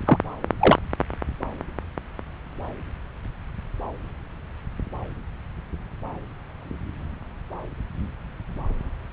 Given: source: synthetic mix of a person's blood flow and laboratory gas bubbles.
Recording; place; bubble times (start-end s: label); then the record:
Doppler ultrasound of blood flow; subclavian vein
0.05-0.18 s: bubbles
0.59-0.78 s: bubbles
From the record:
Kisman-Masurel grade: 213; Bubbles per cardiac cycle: several, 3 to 8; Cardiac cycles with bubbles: 1 to 10%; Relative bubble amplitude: loud (0.450 to 0.775); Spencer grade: 1 (occasional bubble signal discernible with the cardiac motion signal, with majority of cardiac periods free of bubbles); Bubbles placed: anywhere in the cardiac cycle